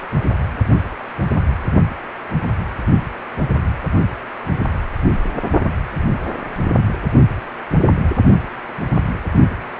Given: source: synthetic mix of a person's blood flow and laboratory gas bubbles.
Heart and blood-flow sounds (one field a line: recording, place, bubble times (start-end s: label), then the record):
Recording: Doppler ultrasound of blood flow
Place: precordium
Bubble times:
0.02-0.08 s: bubbles
0.15-0.19 s: bubbles
From the record:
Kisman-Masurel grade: 211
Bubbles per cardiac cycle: several, 3 to 8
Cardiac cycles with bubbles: 1 to 10%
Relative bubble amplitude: barely perceptible (0.100 to 0.250)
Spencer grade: 1 (occasional bubble signal discernible with the cardiac motion signal, with majority of cardiac periods free of bubbles)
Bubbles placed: only in the low amplitude regions of the cardiac cycle